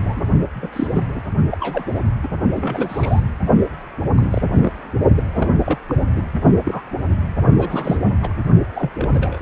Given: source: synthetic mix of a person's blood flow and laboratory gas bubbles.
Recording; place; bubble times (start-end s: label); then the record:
Doppler ultrasound of blood flow; precordium
0.00-0.23 s: bubbles
0.54-0.69 s: bubbles
0.72-0.88 s: bubbles
0.93-1.01 s: bubbles
1.15-1.20 s: bubbles
1.49-1.85 s: bubbles
2.23-2.27 s: bubbles
2.56-3.21 s: bubbles
4.17-4.42 s: bubbles
4.54-4.72 s: bubbles
5.16-5.24 s: bubbles
5.33-5.49 s: bubbles
5.66-5.79 s: bubbles
5.89-5.95 s: bubbles
6.12-6.26 s: bubbles
6.65-6.82 s: bubbles
7.58-7.97 s: bubbles
8.22-8.29 s: bubbles
8.75-8.91 s: bubbles
9.00-9.38 s: bubbles
From the record:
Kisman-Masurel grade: 242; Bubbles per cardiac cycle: several, 3 to 8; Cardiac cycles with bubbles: 100%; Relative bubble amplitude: moderate (0.250 to 0.450); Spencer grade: 3 (all of the cardiac periods contain showers or single bubble signals, but not dominating or overriding the cardiac motion signals); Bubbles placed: only in the low amplitude regions of the cardiac cycle